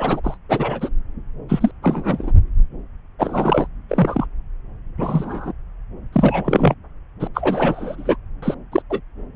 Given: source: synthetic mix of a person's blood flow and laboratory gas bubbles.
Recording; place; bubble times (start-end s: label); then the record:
Doppler ultrasound of blood flow; subclavian vein
0.00-0.21 s: bubbles
0.23-0.37 s: bubbles
0.48-0.89 s: bubbles
1.49-1.71 s: bubbles
1.82-2.32 s: bubbles
3.19-3.67 s: bubbles
3.88-4.26 s: bubbles
4.97-5.53 s: bubbles
6.12-6.74 s: bubbles
7.20-7.28 s: bubbles
7.33-8.16 s: bubbles
8.42-8.54 s: bubbles
8.71-8.82 s: bubbles
8.89-9.01 s: bubbles
From the record:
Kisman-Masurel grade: 233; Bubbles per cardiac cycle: several, 3 to 8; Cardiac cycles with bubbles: 50 to 99%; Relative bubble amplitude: loud (0.450 to 0.775); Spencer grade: 3 (all of the cardiac periods contain showers or single bubble signals, but not dominating or overriding the cardiac motion signals); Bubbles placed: anywhere in the cardiac cycle